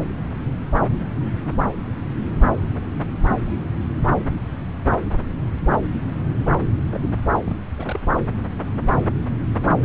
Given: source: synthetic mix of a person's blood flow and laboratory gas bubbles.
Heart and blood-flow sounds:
Doppler ultrasound of blood flow; subclavian vein
6.92-7.00 s: bubbles
7.46-7.56 s: bubbles
7.78-8.00 s: bubbles
From the record:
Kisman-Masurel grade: 211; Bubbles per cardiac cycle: several, 3 to 8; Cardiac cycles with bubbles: 1 to 10%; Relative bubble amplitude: barely perceptible (0.100 to 0.250); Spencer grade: 1 (occasional bubble signal discernible with the cardiac motion signal, with majority of cardiac periods free of bubbles); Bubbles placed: anywhere in the cardiac cycle

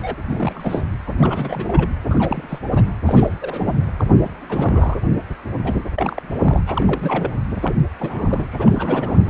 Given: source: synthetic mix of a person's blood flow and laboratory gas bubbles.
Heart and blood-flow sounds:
Doppler ultrasound of blood flow; precordium
0.00-0.15 s: bubbles
0.29-0.85 s: bubbles
1.07-1.12 s: bubbles
1.19-1.88 s: bubbles
2.07-2.59 s: bubbles
2.66-2.92 s: bubbles
3.06-3.34 s: bubbles
3.41-3.74 s: bubbles
3.97-4.04 s: bubbles
4.23-4.30 s: bubbles
4.49-4.97 s: bubbles
5.64-5.75 s: bubbles
5.95-6.63 s: bubbles
6.66-7.32 s: bubbles
7.62-7.76 s: bubbles
8.00-8.47 s: bubbles
8.52-9.29 s: bubbles
From the record:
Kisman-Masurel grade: 342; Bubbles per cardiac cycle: rolling drumbeat, 9 or more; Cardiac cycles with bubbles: 100%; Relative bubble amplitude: moderate (0.250 to 0.450); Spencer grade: 3 (all of the cardiac periods contain showers or single bubble signals, but not dominating or overriding the cardiac motion signals); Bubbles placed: anywhere in the cardiac cycle

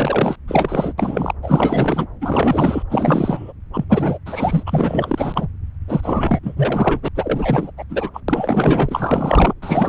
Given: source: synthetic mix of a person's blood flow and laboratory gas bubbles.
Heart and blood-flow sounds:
Doppler ultrasound of blood flow; subclavian vein
0.00-0.35 s: bubbles
0.48-0.93 s: bubbles
0.98-1.33 s: bubbles
1.42-2.07 s: bubbles
2.21-2.83 s: bubbles
2.89-3.52 s: bubbles
3.73-3.84 s: bubbles
3.89-4.18 s: bubbles
4.25-4.63 s: bubbles
4.66-5.47 s: bubbles
5.87-6.39 s: bubbles
6.42-7.08 s: bubbles
7.15-7.71 s: bubbles
7.77-7.84 s: bubbles
7.89-8.11 s: bubbles
8.13-8.21 s: bubbles
8.28-9.54 s: bubbles
9.62-9.88 s: bubbles
From the record:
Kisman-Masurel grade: 444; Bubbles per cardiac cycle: continuous sound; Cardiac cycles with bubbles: 100%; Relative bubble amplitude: maximal (0.775 to 0.999); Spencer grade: 4 (maximum detectable bubble signal sounding continuously throughout systole and diastole of every cardiac period, and overriding the amplitude of the normal cardiac signals); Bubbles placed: anywhere in the cardiac cycle

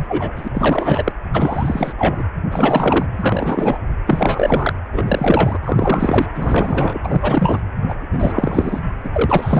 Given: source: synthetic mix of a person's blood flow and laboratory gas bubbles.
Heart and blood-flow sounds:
Doppler ultrasound of blood flow; precordium
0.00-0.31 s: bubbles
0.36-0.48 s: bubbles
0.54-1.12 s: bubbles
1.33-1.93 s: bubbles
1.97-2.23 s: bubbles
2.51-3.06 s: bubbles
3.15-3.79 s: bubbles
4.06-4.73 s: bubbles
4.92-5.59 s: bubbles
5.63-6.26 s: bubbles
6.35-7.61 s: bubbles
7.88-8.80 s: bubbles
9.03-9.10 s: bubbles
9.12-9.60 s: bubbles
From the record:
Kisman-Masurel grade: 343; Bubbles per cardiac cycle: rolling drumbeat, 9 or more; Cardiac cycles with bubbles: 100%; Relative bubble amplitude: loud (0.450 to 0.775); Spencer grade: 3 (all of the cardiac periods contain showers or single bubble signals, but not dominating or overriding the cardiac motion signals); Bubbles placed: anywhere in the cardiac cycle

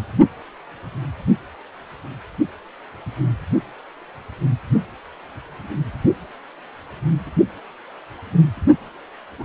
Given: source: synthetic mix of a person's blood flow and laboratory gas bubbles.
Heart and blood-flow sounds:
Doppler ultrasound of blood flow; precordium
9.38-9.44 s: bubbles
From the record:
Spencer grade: 1 (occasional bubble signal discernible with the cardiac motion signal, with majority of cardiac periods free of bubbles); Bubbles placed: only in the low amplitude regions of the cardiac cycle

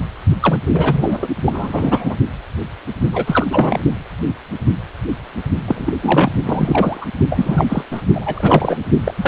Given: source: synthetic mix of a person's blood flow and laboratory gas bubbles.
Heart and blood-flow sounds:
Doppler ultrasound of blood flow; precordium
0.40-0.61 s: bubbles
0.65-1.28 s: bubbles
1.46-2.16 s: bubbles
3.12-3.46 s: bubbles
3.50-3.80 s: bubbles
5.67-5.93 s: bubbles
6.02-6.30 s: bubbles
6.43-7.06 s: bubbles
7.29-7.84 s: bubbles
7.91-8.02 s: bubbles
8.14-8.85 s: bubbles
9.05-9.28 s: bubbles
From the record:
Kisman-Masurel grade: 333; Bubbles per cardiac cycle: rolling drumbeat, 9 or more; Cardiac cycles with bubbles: 50 to 99%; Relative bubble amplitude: loud (0.450 to 0.775); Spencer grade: 3 (all of the cardiac periods contain showers or single bubble signals, but not dominating or overriding the cardiac motion signals); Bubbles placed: only in the low amplitude regions of the cardiac cycle

